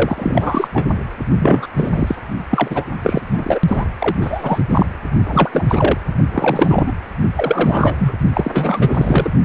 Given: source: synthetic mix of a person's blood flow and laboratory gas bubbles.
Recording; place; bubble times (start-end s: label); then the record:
Doppler ultrasound of blood flow; precordium
0.00-0.68 s: bubbles
0.73-1.00 s: bubbles
1.39-1.67 s: bubbles
1.78-2.16 s: bubbles
2.50-2.84 s: bubbles
3.01-3.59 s: bubbles
3.67-3.84 s: bubbles
3.98-4.16 s: bubbles
4.21-4.64 s: bubbles
4.69-4.86 s: bubbles
5.26-5.64 s: bubbles
5.68-5.97 s: bubbles
6.31-6.92 s: bubbles
7.33-7.96 s: bubbles
7.98-8.14 s: bubbles
8.33-9.30 s: bubbles
From the record:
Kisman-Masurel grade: 343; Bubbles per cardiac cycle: rolling drumbeat, 9 or more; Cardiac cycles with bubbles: 100%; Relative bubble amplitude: loud (0.450 to 0.775); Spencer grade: 3 (all of the cardiac periods contain showers or single bubble signals, but not dominating or overriding the cardiac motion signals); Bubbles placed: only in the low amplitude regions of the cardiac cycle